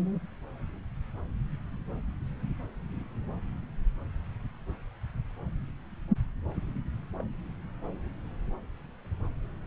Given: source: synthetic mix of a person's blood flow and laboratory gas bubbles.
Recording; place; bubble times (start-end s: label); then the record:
Doppler ultrasound of blood flow; subclavian vein
7.19-7.24 s: bubbles
From the record:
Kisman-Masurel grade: 111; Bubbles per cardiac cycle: 1 to 2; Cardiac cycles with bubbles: 1 to 10%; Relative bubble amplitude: barely perceptible (0.100 to 0.250); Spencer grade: 1 (occasional bubble signal discernible with the cardiac motion signal, with majority of cardiac periods free of bubbles); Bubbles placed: anywhere in the cardiac cycle